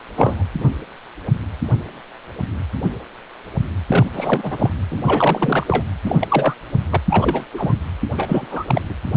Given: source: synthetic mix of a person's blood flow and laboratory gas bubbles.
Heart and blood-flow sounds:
Doppler ultrasound of blood flow; precordium
0.16-0.47 s: bubbles
3.88-4.06 s: bubbles
4.13-4.71 s: bubbles
4.91-4.98 s: bubbles
5.06-5.83 s: bubbles
6.05-6.16 s: bubbles
6.21-6.54 s: bubbles
6.91-7.01 s: bubbles
7.09-7.45 s: bubbles
7.54-7.74 s: bubbles
8.17-8.65 s: bubbles
8.67-8.81 s: bubbles
8.89-8.94 s: bubbles
From the record:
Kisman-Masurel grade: 332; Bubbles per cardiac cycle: rolling drumbeat, 9 or more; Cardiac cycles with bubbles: 50 to 99%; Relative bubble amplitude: moderate (0.250 to 0.450); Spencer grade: 3 (all of the cardiac periods contain showers or single bubble signals, but not dominating or overriding the cardiac motion signals); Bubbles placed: anywhere in the cardiac cycle

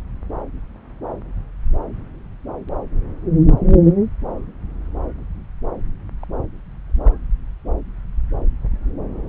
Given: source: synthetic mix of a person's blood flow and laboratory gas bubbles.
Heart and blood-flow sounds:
Doppler ultrasound of blood flow; subclavian vein
3.42-3.44 s: bubbles
3.65-4.05 s: bubbles
4.26-4.30 s: bubbles
4.36-4.47 s: bubbles
6.23-6.26 s: bubbles
6.88-7.17 s: bubbles
From the record:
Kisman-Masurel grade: 121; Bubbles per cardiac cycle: 1 to 2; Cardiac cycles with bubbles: 10 to 50%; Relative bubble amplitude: barely perceptible (0.100 to 0.250); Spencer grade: 2 (many but less than half of the cardiac periods contain bubble signals, singularly or in groups); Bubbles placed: anywhere in the cardiac cycle

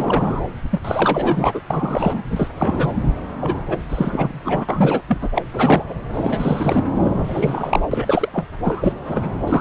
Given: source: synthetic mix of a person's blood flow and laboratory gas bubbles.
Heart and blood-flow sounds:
Doppler ultrasound of blood flow; subclavian vein
0.00-0.43 s: bubbles
0.70-0.80 s: bubbles
0.84-1.60 s: bubbles
1.70-2.23 s: bubbles
2.30-2.48 s: bubbles
2.58-2.94 s: bubbles
3.41-3.58 s: bubbles
3.66-3.76 s: bubbles
3.89-4.40 s: bubbles
4.45-4.65 s: bubbles
4.69-5.03 s: bubbles
5.08-5.19 s: bubbles
5.21-5.30 s: bubbles
5.34-5.43 s: bubbles
5.53-5.84 s: bubbles
5.88-5.95 s: bubbles
6.13-6.84 s: bubbles
7.04-7.88 s: bubbles
7.91-8.29 s: bubbles
8.33-8.46 s: bubbles
8.63-9.41 s: bubbles
9.47-9.61 s: bubbles
From the record:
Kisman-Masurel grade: 343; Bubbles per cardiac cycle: rolling drumbeat, 9 or more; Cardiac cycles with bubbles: 100%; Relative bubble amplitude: loud (0.450 to 0.775); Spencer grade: 3 (all of the cardiac periods contain showers or single bubble signals, but not dominating or overriding the cardiac motion signals); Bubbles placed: anywhere in the cardiac cycle

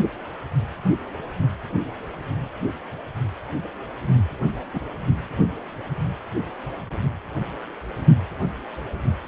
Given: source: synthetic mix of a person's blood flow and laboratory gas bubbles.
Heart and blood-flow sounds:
Doppler ultrasound of blood flow; precordium
4.74-4.79 s: bubbles
From the record:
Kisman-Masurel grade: 112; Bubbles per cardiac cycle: 1 to 2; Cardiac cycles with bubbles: 1 to 10%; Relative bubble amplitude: moderate (0.250 to 0.450); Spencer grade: 1 (occasional bubble signal discernible with the cardiac motion signal, with majority of cardiac periods free of bubbles); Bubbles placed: anywhere in the cardiac cycle

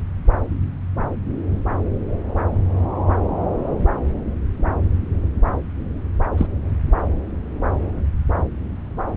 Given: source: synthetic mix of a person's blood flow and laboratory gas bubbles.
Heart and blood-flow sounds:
Doppler ultrasound of blood flow; subclavian vein
6.37-6.46 s: bubbles
From the record:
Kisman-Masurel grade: 122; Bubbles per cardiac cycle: 1 to 2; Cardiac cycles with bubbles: 10 to 50%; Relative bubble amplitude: moderate (0.250 to 0.450); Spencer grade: 2 (many but less than half of the cardiac periods contain bubble signals, singularly or in groups); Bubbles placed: anywhere in the cardiac cycle

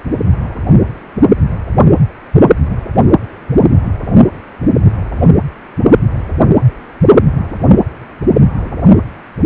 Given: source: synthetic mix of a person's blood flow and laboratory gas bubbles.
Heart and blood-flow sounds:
Doppler ultrasound of blood flow; precordium
no bubbles
From the record:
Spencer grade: 0 (complete lack of bubble signals)

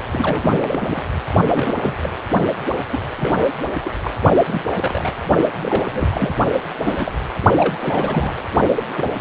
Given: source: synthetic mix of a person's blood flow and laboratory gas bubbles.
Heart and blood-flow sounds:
Doppler ultrasound of blood flow; precordium
0.09-1.02 s: bubbles
1.46-1.98 s: bubbles
2.02-2.09 s: bubbles
2.91-3.00 s: bubbles
3.13-3.48 s: bubbles
3.84-3.91 s: bubbles
4.05-4.11 s: bubbles
4.46-4.62 s: bubbles
4.75-5.12 s: bubbles
5.61-6.36 s: bubbles
6.85-7.18 s: bubbles
7.58-7.78 s: bubbles
7.81-8.34 s: bubbles
8.74-8.83 s: bubbles
8.95-9.10 s: bubbles
From the record:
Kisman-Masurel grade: 242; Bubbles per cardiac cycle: several, 3 to 8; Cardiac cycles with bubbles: 100%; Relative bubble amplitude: moderate (0.250 to 0.450); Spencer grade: 3 (all of the cardiac periods contain showers or single bubble signals, but not dominating or overriding the cardiac motion signals); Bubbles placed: only in the low amplitude regions of the cardiac cycle

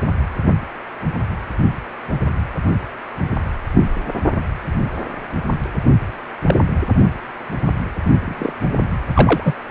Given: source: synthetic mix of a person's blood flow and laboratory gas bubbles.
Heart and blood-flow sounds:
Doppler ultrasound of blood flow; precordium
3.74-3.85 s: bubbles
6.46-6.54 s: bubbles
8.24-8.53 s: bubbles
9.14-9.55 s: bubbles
From the record:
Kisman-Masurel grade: 123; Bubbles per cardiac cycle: 1 to 2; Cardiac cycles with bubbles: 10 to 50%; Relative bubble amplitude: loud (0.450 to 0.775); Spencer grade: 2 (many but less than half of the cardiac periods contain bubble signals, singularly or in groups); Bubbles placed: anywhere in the cardiac cycle

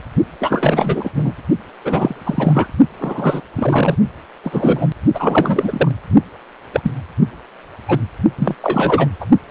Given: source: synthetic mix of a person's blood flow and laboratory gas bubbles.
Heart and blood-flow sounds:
Doppler ultrasound of blood flow; precordium
0.40-1.11 s: bubbles
1.15-1.32 s: bubbles
1.82-2.67 s: bubbles
2.99-3.42 s: bubbles
3.55-3.96 s: bubbles
4.43-4.88 s: bubbles
5.13-5.91 s: bubbles
6.73-6.80 s: bubbles
6.83-6.94 s: bubbles
7.88-7.99 s: bubbles
8.38-8.55 s: bubbles
8.62-9.09 s: bubbles
9.20-9.26 s: bubbles
From the record:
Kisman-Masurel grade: 243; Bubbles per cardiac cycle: several, 3 to 8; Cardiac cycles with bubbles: 100%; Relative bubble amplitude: loud (0.450 to 0.775); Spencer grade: 3 (all of the cardiac periods contain showers or single bubble signals, but not dominating or overriding the cardiac motion signals); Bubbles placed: only in the low amplitude regions of the cardiac cycle

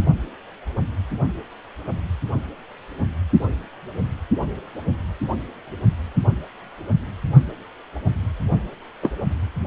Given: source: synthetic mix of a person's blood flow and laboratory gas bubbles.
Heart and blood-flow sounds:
Doppler ultrasound of blood flow; precordium
9.02-9.12 s: bubbles
From the record:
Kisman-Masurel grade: 113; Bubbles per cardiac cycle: 1 to 2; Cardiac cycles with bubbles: 1 to 10%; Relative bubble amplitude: loud (0.450 to 0.775); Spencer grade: 1 (occasional bubble signal discernible with the cardiac motion signal, with majority of cardiac periods free of bubbles); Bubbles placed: only in the low amplitude regions of the cardiac cycle

